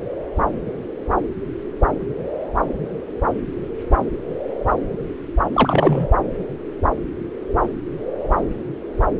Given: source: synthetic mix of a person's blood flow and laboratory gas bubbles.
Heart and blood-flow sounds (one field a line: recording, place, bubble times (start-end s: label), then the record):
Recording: Doppler ultrasound of blood flow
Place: subclavian vein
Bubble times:
5.53-6.08 s: bubbles
From the record:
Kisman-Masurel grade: 213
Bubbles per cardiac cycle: several, 3 to 8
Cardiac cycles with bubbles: 1 to 10%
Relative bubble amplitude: loud (0.450 to 0.775)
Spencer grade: 1 (occasional bubble signal discernible with the cardiac motion signal, with majority of cardiac periods free of bubbles)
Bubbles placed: anywhere in the cardiac cycle